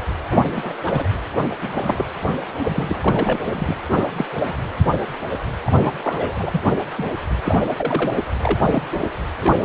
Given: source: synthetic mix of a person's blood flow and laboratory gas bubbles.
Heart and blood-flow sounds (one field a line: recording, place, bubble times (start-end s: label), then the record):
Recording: Doppler ultrasound of blood flow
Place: precordium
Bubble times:
0.28-0.76 s: bubbles
0.86-1.11 s: bubbles
1.62-2.06 s: bubbles
2.63-3.39 s: bubbles
3.42-3.75 s: bubbles
3.95-4.07 s: bubbles
4.16-4.25 s: bubbles
4.48-4.53 s: bubbles
5.66-5.91 s: bubbles
6.03-6.61 s: bubbles
6.69-6.74 s: bubbles
6.98-7.12 s: bubbles
7.44-7.61 s: bubbles
7.78-8.19 s: bubbles
8.43-8.66 s: bubbles
8.71-8.82 s: bubbles
8.91-9.13 s: bubbles
9.42-9.53 s: bubbles
9.61-9.65 s: bubbles
From the record:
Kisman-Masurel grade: 242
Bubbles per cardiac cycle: several, 3 to 8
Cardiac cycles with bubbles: 100%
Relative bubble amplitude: moderate (0.250 to 0.450)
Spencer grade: 3 (all of the cardiac periods contain showers or single bubble signals, but not dominating or overriding the cardiac motion signals)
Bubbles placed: anywhere in the cardiac cycle